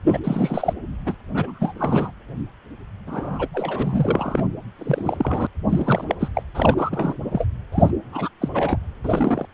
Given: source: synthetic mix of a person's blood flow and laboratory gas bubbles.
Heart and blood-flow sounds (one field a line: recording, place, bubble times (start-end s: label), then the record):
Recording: Doppler ultrasound of blood flow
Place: precordium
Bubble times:
0.07-0.20 s: bubbles
0.24-0.73 s: bubbles
1.05-1.15 s: bubbles
1.34-2.11 s: bubbles
3.07-3.47 s: bubbles
3.54-4.45 s: bubbles
4.79-5.47 s: bubbles
5.69-6.04 s: bubbles
6.09-6.15 s: bubbles
6.20-6.30 s: bubbles
6.34-6.42 s: bubbles
6.54-7.17 s: bubbles
7.25-7.45 s: bubbles
7.72-7.91 s: bubbles
8.12-8.29 s: bubbles
8.41-8.49 s: bubbles
8.54-8.79 s: bubbles
9.04-9.46 s: bubbles
From the record:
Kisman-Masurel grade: 342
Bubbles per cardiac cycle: rolling drumbeat, 9 or more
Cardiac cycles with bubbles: 100%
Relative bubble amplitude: moderate (0.250 to 0.450)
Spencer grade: 3 (all of the cardiac periods contain showers or single bubble signals, but not dominating or overriding the cardiac motion signals)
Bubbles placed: anywhere in the cardiac cycle